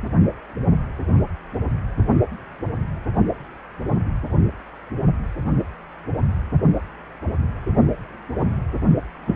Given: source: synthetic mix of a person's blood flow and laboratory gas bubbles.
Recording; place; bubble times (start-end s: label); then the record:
Doppler ultrasound of blood flow; precordium
9.27-9.36 s: bubbles
From the record:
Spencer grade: 1 (occasional bubble signal discernible with the cardiac motion signal, with majority of cardiac periods free of bubbles); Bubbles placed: only in the low amplitude regions of the cardiac cycle